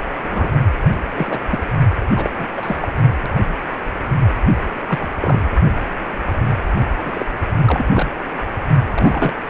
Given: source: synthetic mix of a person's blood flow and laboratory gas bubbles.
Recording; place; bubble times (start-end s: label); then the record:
Doppler ultrasound of blood flow; precordium
0.23-0.50 s: bubbles
1.17-1.39 s: bubbles
1.50-1.59 s: bubbles
2.16-2.30 s: bubbles
2.38-2.46 s: bubbles
2.57-2.77 s: bubbles
2.80-2.88 s: bubbles
4.87-4.98 s: bubbles
5.01-5.08 s: bubbles
5.21-5.51 s: bubbles
7.04-7.25 s: bubbles
7.65-7.83 s: bubbles
7.86-8.07 s: bubbles
8.95-9.32 s: bubbles
From the record:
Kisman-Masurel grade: 232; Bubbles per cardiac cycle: several, 3 to 8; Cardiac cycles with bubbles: 50 to 99%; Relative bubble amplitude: moderate (0.250 to 0.450); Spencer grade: 3 (all of the cardiac periods contain showers or single bubble signals, but not dominating or overriding the cardiac motion signals); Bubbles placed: only in the low amplitude regions of the cardiac cycle